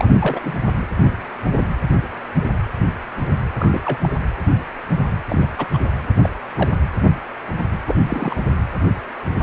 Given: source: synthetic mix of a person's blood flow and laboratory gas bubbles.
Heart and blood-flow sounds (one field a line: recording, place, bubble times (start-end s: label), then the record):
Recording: Doppler ultrasound of blood flow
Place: precordium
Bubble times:
0.00-0.05 s: bubbles
0.20-0.40 s: bubbles
0.43-0.52 s: bubbles
3.59-3.81 s: bubbles
3.84-3.98 s: bubbles
4.02-4.09 s: bubbles
5.30-5.47 s: bubbles
5.57-5.67 s: bubbles
5.73-5.78 s: bubbles
6.22-6.29 s: bubbles
6.55-6.69 s: bubbles
7.86-7.95 s: bubbles
8.06-8.35 s: bubbles
From the record:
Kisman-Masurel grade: 222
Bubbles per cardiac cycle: several, 3 to 8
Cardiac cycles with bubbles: 10 to 50%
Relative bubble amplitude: moderate (0.250 to 0.450)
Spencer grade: 2 (many but less than half of the cardiac periods contain bubble signals, singularly or in groups)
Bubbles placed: anywhere in the cardiac cycle